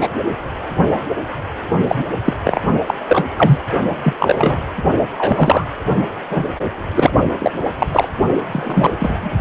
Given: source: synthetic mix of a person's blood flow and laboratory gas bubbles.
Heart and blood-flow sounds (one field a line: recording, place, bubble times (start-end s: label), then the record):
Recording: Doppler ultrasound of blood flow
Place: precordium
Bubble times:
0.00-0.08 s: bubbles
1.88-2.04 s: bubbles
2.25-2.33 s: bubbles
2.43-2.61 s: bubbles
2.86-2.94 s: bubbles
3.08-3.27 s: bubbles
3.38-3.60 s: bubbles
4.03-4.13 s: bubbles
4.20-4.61 s: bubbles
5.17-5.68 s: bubbles
6.30-6.46 s: bubbles
6.95-7.12 s: bubbles
7.39-7.52 s: bubbles
7.79-7.87 s: bubbles
7.92-8.08 s: bubbles
8.52-8.91 s: bubbles
9.00-9.32 s: bubbles
From the record:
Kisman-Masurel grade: 243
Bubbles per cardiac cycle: several, 3 to 8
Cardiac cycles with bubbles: 100%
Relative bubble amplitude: loud (0.450 to 0.775)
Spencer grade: 3 (all of the cardiac periods contain showers or single bubble signals, but not dominating or overriding the cardiac motion signals)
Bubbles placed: only in the low amplitude regions of the cardiac cycle